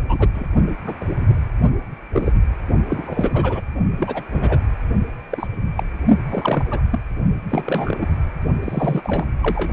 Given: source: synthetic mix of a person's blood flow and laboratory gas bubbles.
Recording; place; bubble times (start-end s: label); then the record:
Doppler ultrasound of blood flow; precordium
0.08-0.29 s: bubbles
0.34-0.47 s: bubbles
0.86-0.95 s: bubbles
1.00-1.05 s: bubbles
1.18-1.26 s: bubbles
2.13-2.32 s: bubbles
2.89-3.61 s: bubbles
3.96-4.23 s: bubbles
4.32-4.67 s: bubbles
5.31-5.47 s: bubbles
5.77-5.83 s: bubbles
6.29-6.65 s: bubbles
6.71-6.80 s: bubbles
6.91-6.99 s: bubbles
7.50-8.07 s: bubbles
8.62-9.02 s: bubbles
9.04-9.26 s: bubbles
9.42-9.71 s: bubbles
From the record:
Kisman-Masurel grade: 242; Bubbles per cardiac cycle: several, 3 to 8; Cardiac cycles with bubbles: 100%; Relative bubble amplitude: moderate (0.250 to 0.450); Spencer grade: 3 (all of the cardiac periods contain showers or single bubble signals, but not dominating or overriding the cardiac motion signals); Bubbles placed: only in the low amplitude regions of the cardiac cycle